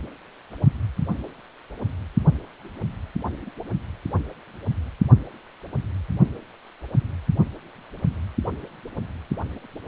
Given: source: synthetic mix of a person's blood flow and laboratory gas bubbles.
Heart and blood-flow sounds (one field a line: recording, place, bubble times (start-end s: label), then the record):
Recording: Doppler ultrasound of blood flow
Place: precordium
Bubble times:
3.46-3.51 s: bubbles
From the record:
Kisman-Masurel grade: 111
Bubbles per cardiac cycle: 1 to 2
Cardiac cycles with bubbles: 1 to 10%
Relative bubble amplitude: barely perceptible (0.100 to 0.250)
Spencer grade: 1 (occasional bubble signal discernible with the cardiac motion signal, with majority of cardiac periods free of bubbles)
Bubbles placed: only in the low amplitude regions of the cardiac cycle